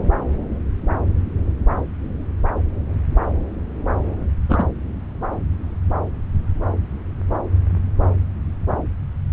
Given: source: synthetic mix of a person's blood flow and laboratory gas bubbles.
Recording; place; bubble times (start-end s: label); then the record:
Doppler ultrasound of blood flow; subclavian vein
4.49-4.64 s: bubbles
From the record:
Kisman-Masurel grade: 122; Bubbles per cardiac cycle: 1 to 2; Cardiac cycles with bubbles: 10 to 50%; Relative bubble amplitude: moderate (0.250 to 0.450); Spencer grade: 2 (many but less than half of the cardiac periods contain bubble signals, singularly or in groups); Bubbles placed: anywhere in the cardiac cycle